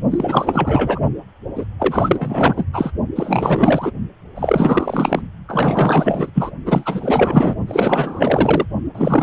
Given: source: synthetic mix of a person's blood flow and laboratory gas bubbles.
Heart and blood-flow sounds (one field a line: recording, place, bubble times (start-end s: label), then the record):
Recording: Doppler ultrasound of blood flow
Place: precordium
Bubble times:
0.11-1.00 s: bubbles
1.55-1.65 s: bubbles
1.79-2.65 s: bubbles
2.73-2.91 s: bubbles
3.15-3.92 s: bubbles
4.34-5.21 s: bubbles
5.48-6.31 s: bubbles
6.34-6.50 s: bubbles
6.66-7.56 s: bubbles
7.67-8.65 s: bubbles
8.94-9.23 s: bubbles
From the record:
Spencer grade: 4 (maximum detectable bubble signal sounding continuously throughout systole and diastole of every cardiac period, and overriding the amplitude of the normal cardiac signals)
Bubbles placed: only in the low amplitude regions of the cardiac cycle